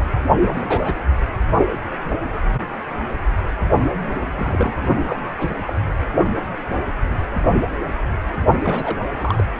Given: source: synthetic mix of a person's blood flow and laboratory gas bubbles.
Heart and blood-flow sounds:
Doppler ultrasound of blood flow; precordium
0.40-0.98 s: bubbles
3.83-4.26 s: bubbles
4.35-4.88 s: bubbles
5.06-5.22 s: bubbles
5.37-5.56 s: bubbles
5.67-5.73 s: bubbles
8.56-8.97 s: bubbles
9.17-9.44 s: bubbles
From the record:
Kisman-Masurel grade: 221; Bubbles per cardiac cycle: several, 3 to 8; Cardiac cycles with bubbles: 10 to 50%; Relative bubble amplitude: barely perceptible (0.100 to 0.250); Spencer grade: 2 (many but less than half of the cardiac periods contain bubble signals, singularly or in groups); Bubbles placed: anywhere in the cardiac cycle

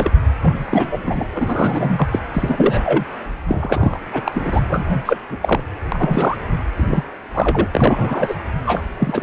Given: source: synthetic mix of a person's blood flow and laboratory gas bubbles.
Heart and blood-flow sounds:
Doppler ultrasound of blood flow; precordium
0.00-0.17 s: bubbles
0.42-0.98 s: bubbles
1.05-1.26 s: bubbles
1.33-2.08 s: bubbles
2.11-2.21 s: bubbles
2.33-3.04 s: bubbles
3.48-4.00 s: bubbles
4.12-4.21 s: bubbles
4.25-4.61 s: bubbles
4.69-5.02 s: bubbles
5.05-5.17 s: bubbles
5.29-5.37 s: bubbles
5.42-5.60 s: bubbles
5.92-6.36 s: bubbles
6.76-7.04 s: bubbles
7.33-7.67 s: bubbles
7.74-8.35 s: bubbles
8.66-8.84 s: bubbles
8.98-9.23 s: bubbles
From the record:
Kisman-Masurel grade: 343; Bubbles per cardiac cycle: rolling drumbeat, 9 or more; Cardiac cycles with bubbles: 100%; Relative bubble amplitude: loud (0.450 to 0.775); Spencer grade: 3 (all of the cardiac periods contain showers or single bubble signals, but not dominating or overriding the cardiac motion signals); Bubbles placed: anywhere in the cardiac cycle

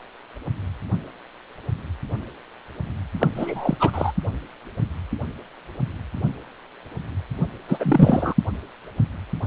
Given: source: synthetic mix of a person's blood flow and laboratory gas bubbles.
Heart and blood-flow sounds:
Doppler ultrasound of blood flow; precordium
3.19-3.28 s: bubbles
3.34-3.77 s: bubbles
3.79-4.12 s: bubbles
7.68-8.34 s: bubbles
From the record:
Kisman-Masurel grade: 223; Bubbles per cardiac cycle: several, 3 to 8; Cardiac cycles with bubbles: 10 to 50%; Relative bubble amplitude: loud (0.450 to 0.775); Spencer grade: 2 (many but less than half of the cardiac periods contain bubble signals, singularly or in groups); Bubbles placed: only in the low amplitude regions of the cardiac cycle

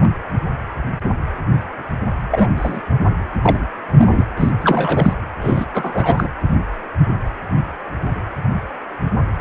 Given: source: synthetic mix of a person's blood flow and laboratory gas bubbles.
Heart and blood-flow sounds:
Doppler ultrasound of blood flow; precordium
0.00-0.10 s: bubbles
2.31-2.47 s: bubbles
2.56-2.81 s: bubbles
3.42-3.66 s: bubbles
3.97-4.25 s: bubbles
4.37-4.51 s: bubbles
4.61-5.13 s: bubbles
5.41-5.66 s: bubbles
5.74-6.28 s: bubbles
From the record:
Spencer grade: 3 (all of the cardiac periods contain showers or single bubble signals, but not dominating or overriding the cardiac motion signals); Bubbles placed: anywhere in the cardiac cycle

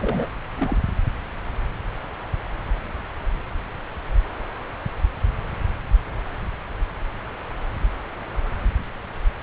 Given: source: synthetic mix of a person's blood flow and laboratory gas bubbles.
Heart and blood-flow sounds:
Doppler ultrasound of blood flow; subclavian vein
0.00-0.28 s: bubbles
0.57-0.78 s: bubbles
From the record:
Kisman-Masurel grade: 211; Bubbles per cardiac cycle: several, 3 to 8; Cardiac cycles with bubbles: 1 to 10%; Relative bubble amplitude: barely perceptible (0.100 to 0.250); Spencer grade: 1 (occasional bubble signal discernible with the cardiac motion signal, with majority of cardiac periods free of bubbles); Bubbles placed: anywhere in the cardiac cycle

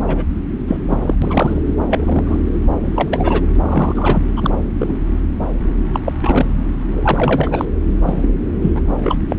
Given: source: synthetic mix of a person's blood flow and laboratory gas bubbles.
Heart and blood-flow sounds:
Doppler ultrasound of blood flow; subclavian vein
0.07-0.24 s: bubbles
0.67-0.77 s: bubbles
0.89-1.15 s: bubbles
1.22-1.74 s: bubbles
1.89-2.44 s: bubbles
2.85-3.44 s: bubbles
3.61-4.23 s: bubbles
4.36-4.50 s: bubbles
4.78-4.94 s: bubbles
5.94-6.00 s: bubbles
6.05-6.12 s: bubbles
6.21-6.46 s: bubbles
6.96-7.65 s: bubbles
7.92-8.29 s: bubbles
8.62-8.82 s: bubbles
9.03-9.18 s: bubbles
9.29-9.36 s: bubbles
From the record:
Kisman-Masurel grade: 243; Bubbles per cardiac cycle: several, 3 to 8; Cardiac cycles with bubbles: 100%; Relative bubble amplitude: loud (0.450 to 0.775); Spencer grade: 3 (all of the cardiac periods contain showers or single bubble signals, but not dominating or overriding the cardiac motion signals); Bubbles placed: anywhere in the cardiac cycle

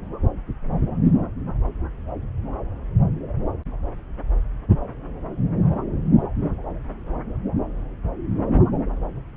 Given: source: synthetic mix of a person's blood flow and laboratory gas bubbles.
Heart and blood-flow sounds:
Doppler ultrasound of blood flow; subclavian vein
no bubbles
From the record:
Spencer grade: 0 (complete lack of bubble signals)

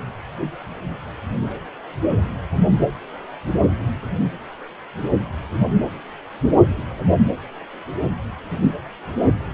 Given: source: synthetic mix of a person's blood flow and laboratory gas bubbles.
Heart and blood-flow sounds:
Doppler ultrasound of blood flow; precordium
8.62-8.77 s: bubbles
From the record:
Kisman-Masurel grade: 113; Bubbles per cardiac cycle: 1 to 2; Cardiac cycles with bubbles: 1 to 10%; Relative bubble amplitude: loud (0.450 to 0.775); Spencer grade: 1 (occasional bubble signal discernible with the cardiac motion signal, with majority of cardiac periods free of bubbles); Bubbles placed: anywhere in the cardiac cycle

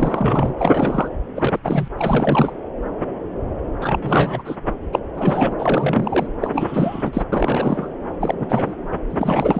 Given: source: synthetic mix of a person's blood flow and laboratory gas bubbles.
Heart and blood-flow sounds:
Doppler ultrasound of blood flow; subclavian vein
0.00-0.54 s: bubbles
0.59-1.08 s: bubbles
1.35-1.59 s: bubbles
1.63-1.88 s: bubbles
1.97-2.53 s: bubbles
3.81-4.42 s: bubbles
4.45-4.56 s: bubbles
4.92-4.99 s: bubbles
5.14-5.53 s: bubbles
5.58-6.27 s: bubbles
6.41-7.23 s: bubbles
7.32-7.89 s: bubbles
8.21-8.34 s: bubbles
8.39-8.73 s: bubbles
9.09-9.60 s: bubbles
From the record:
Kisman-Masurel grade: 332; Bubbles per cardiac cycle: rolling drumbeat, 9 or more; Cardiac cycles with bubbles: 50 to 99%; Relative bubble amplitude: moderate (0.250 to 0.450); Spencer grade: 3 (all of the cardiac periods contain showers or single bubble signals, but not dominating or overriding the cardiac motion signals); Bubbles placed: anywhere in the cardiac cycle

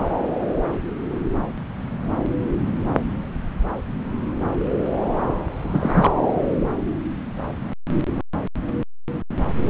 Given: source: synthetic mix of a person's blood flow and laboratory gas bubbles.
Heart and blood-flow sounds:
Doppler ultrasound of blood flow; subclavian vein
5.64-6.11 s: bubbles
From the record:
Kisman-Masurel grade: 212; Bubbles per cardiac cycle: several, 3 to 8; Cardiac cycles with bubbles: 1 to 10%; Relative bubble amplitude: moderate (0.250 to 0.450); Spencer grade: 1 (occasional bubble signal discernible with the cardiac motion signal, with majority of cardiac periods free of bubbles); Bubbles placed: anywhere in the cardiac cycle

